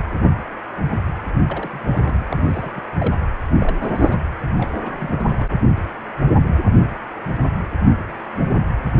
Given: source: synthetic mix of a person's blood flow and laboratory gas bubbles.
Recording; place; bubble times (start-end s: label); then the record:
Doppler ultrasound of blood flow; precordium
1.47-1.69 s: bubbles
1.73-1.80 s: bubbles
1.92-2.25 s: bubbles
2.30-2.72 s: bubbles
2.75-2.82 s: bubbles
2.99-3.13 s: bubbles
3.60-4.17 s: bubbles
4.57-4.72 s: bubbles
4.83-4.92 s: bubbles
4.98-5.46 s: bubbles
From the record:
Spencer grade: 2 (many but less than half of the cardiac periods contain bubble signals, singularly or in groups); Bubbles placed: anywhere in the cardiac cycle